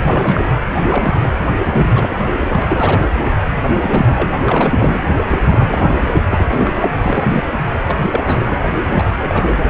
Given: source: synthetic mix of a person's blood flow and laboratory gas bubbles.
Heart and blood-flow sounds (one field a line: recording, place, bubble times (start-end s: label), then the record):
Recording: Doppler ultrasound of blood flow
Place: precordium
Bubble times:
0.01-0.42 s: bubbles
0.81-1.29 s: bubbles
1.64-2.45 s: bubbles
2.48-3.06 s: bubbles
3.39-3.45 s: bubbles
3.70-4.29 s: bubbles
4.46-5.00 s: bubbles
5.29-5.39 s: bubbles
5.42-6.12 s: bubbles
6.28-6.46 s: bubbles
6.49-6.88 s: bubbles
6.98-7.43 s: bubbles
7.84-7.96 s: bubbles
8.12-8.58 s: bubbles
8.75-9.16 s: bubbles
9.19-9.54 s: bubbles
9.67-9.70 s: bubbles
From the record:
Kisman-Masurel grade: 342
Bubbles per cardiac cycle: rolling drumbeat, 9 or more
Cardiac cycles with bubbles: 100%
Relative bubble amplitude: moderate (0.250 to 0.450)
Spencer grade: 3 (all of the cardiac periods contain showers or single bubble signals, but not dominating or overriding the cardiac motion signals)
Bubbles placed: anywhere in the cardiac cycle